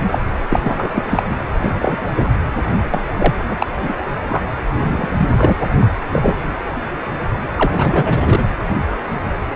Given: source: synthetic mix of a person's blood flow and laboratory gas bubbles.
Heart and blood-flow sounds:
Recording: Doppler ultrasound of blood flow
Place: precordium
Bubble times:
0.00-0.18 s: bubbles
0.52-1.23 s: bubbles
1.29-1.36 s: bubbles
1.59-1.71 s: bubbles
1.80-2.10 s: bubbles
2.15-2.28 s: bubbles
2.90-3.01 s: bubbles
3.17-3.34 s: bubbles
3.48-3.67 s: bubbles
3.82-3.94 s: bubbles
4.29-4.44 s: bubbles
4.79-5.08 s: bubbles
5.17-5.56 s: bubbles
5.81-5.85 s: bubbles
6.12-6.35 s: bubbles
7.57-8.43 s: bubbles
From the record:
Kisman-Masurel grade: 233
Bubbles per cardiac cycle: several, 3 to 8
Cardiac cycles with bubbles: 50 to 99%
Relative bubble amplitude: loud (0.450 to 0.775)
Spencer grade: 3 (all of the cardiac periods contain showers or single bubble signals, but not dominating or overriding the cardiac motion signals)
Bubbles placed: anywhere in the cardiac cycle

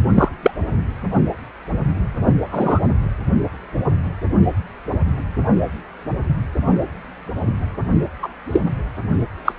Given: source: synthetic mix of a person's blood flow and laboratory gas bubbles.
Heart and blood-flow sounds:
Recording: Doppler ultrasound of blood flow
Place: precordium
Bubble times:
0.15-0.28 s: bubbles
0.42-0.51 s: bubbles
2.51-2.79 s: bubbles
8.22-8.28 s: bubbles
8.53-8.62 s: bubbles
9.45-9.53 s: bubbles
From the record:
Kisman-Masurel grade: 123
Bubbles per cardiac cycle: 1 to 2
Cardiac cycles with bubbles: 10 to 50%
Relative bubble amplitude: loud (0.450 to 0.775)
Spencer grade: 2 (many but less than half of the cardiac periods contain bubble signals, singularly or in groups)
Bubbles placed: anywhere in the cardiac cycle

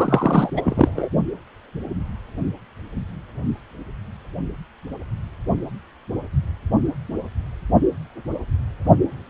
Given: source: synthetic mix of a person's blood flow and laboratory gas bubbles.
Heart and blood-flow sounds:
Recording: Doppler ultrasound of blood flow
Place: precordium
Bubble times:
0.00-0.50 s: bubbles
0.56-1.08 s: bubbles
From the record:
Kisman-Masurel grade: 213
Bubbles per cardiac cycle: several, 3 to 8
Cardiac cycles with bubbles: 1 to 10%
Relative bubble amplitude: loud (0.450 to 0.775)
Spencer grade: 1 (occasional bubble signal discernible with the cardiac motion signal, with majority of cardiac periods free of bubbles)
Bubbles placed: only in the low amplitude regions of the cardiac cycle

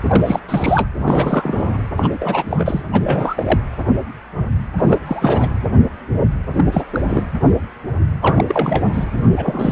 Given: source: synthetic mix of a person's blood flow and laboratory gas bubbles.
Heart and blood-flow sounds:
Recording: Doppler ultrasound of blood flow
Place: precordium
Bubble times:
0.09-0.39 s: bubbles
0.48-0.88 s: bubbles
0.98-1.79 s: bubbles
1.97-2.09 s: bubbles
2.13-2.82 s: bubbles
2.92-3.60 s: bubbles
4.78-4.99 s: bubbles
5.05-5.50 s: bubbles
6.55-6.65 s: bubbles
6.71-6.84 s: bubbles
6.92-7.01 s: bubbles
7.07-7.25 s: bubbles
8.21-8.45 s: bubbles
8.48-8.83 s: bubbles
8.93-9.05 s: bubbles
9.13-9.30 s: bubbles
9.36-9.72 s: bubbles
From the record:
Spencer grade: 3 (all of the cardiac periods contain showers or single bubble signals, but not dominating or overriding the cardiac motion signals)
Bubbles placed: anywhere in the cardiac cycle

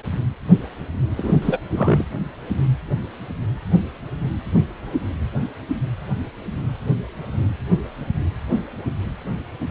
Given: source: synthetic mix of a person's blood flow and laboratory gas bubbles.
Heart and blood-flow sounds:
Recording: Doppler ultrasound of blood flow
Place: precordium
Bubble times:
1.17-1.34 s: bubbles
1.42-1.59 s: bubbles
1.74-2.05 s: bubbles
From the record:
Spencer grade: 1 (occasional bubble signal discernible with the cardiac motion signal, with majority of cardiac periods free of bubbles)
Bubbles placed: anywhere in the cardiac cycle

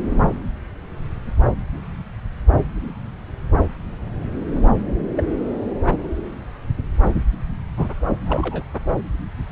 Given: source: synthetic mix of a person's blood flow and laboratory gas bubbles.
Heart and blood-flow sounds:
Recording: Doppler ultrasound of blood flow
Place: subclavian vein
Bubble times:
5.16-5.24 s: bubbles
5.87-6.06 s: bubbles
7.77-7.89 s: bubbles
8.26-8.64 s: bubbles
From the record:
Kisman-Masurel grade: 221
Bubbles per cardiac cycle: several, 3 to 8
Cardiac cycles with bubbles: 10 to 50%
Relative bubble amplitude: barely perceptible (0.100 to 0.250)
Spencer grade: 2 (many but less than half of the cardiac periods contain bubble signals, singularly or in groups)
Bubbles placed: anywhere in the cardiac cycle

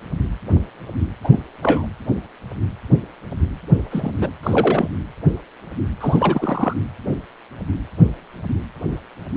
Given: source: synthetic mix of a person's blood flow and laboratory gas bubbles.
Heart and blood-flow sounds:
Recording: Doppler ultrasound of blood flow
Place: precordium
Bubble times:
1.23-1.40 s: bubbles
1.62-1.88 s: bubbles
3.91-4.12 s: bubbles
4.19-4.30 s: bubbles
4.43-4.88 s: bubbles
6.00-6.74 s: bubbles
From the record:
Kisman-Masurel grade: 222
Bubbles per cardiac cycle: several, 3 to 8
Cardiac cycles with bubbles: 10 to 50%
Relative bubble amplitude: moderate (0.250 to 0.450)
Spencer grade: 2 (many but less than half of the cardiac periods contain bubble signals, singularly or in groups)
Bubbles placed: anywhere in the cardiac cycle

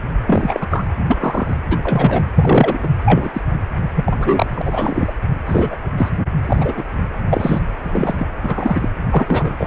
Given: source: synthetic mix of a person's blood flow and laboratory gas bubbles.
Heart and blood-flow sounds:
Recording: Doppler ultrasound of blood flow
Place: precordium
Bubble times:
0.27-0.67 s: bubbles
0.70-0.86 s: bubbles
1.08-1.17 s: bubbles
1.19-1.53 s: bubbles
1.70-1.77 s: bubbles
1.83-2.25 s: bubbles
2.35-2.79 s: bubbles
2.83-2.88 s: bubbles
3.06-3.41 s: bubbles
3.95-4.62 s: bubbles
4.64-5.13 s: bubbles
5.46-5.75 s: bubbles
5.97-6.09 s: bubbles
6.47-6.84 s: bubbles
7.29-7.60 s: bubbles
7.82-8.27 s: bubbles
8.42-8.89 s: bubbles
9.10-9.50 s: bubbles
9.58-9.67 s: bubbles
From the record:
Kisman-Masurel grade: 243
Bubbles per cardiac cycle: several, 3 to 8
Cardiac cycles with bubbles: 100%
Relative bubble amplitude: loud (0.450 to 0.775)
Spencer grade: 3 (all of the cardiac periods contain showers or single bubble signals, but not dominating or overriding the cardiac motion signals)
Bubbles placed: anywhere in the cardiac cycle

